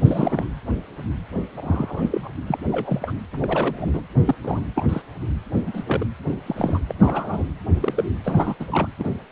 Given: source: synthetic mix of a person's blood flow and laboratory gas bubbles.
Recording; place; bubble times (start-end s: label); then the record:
Doppler ultrasound of blood flow; precordium
0.04-0.46 s: bubbles
1.57-2.29 s: bubbles
2.46-2.58 s: bubbles
2.71-3.13 s: bubbles
3.33-4.02 s: bubbles
4.24-4.35 s: bubbles
4.43-4.62 s: bubbles
4.75-5.01 s: bubbles
5.65-5.83 s: bubbles
5.86-6.05 s: bubbles
6.46-6.80 s: bubbles
6.88-6.95 s: bubbles
7.00-7.45 s: bubbles
7.80-8.04 s: bubbles
8.24-8.55 s: bubbles
8.60-8.66 s: bubbles
8.71-8.88 s: bubbles
8.99-9.11 s: bubbles
From the record:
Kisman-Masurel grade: 232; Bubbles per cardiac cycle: several, 3 to 8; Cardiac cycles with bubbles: 50 to 99%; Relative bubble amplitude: moderate (0.250 to 0.450); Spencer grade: 3 (all of the cardiac periods contain showers or single bubble signals, but not dominating or overriding the cardiac motion signals); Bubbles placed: anywhere in the cardiac cycle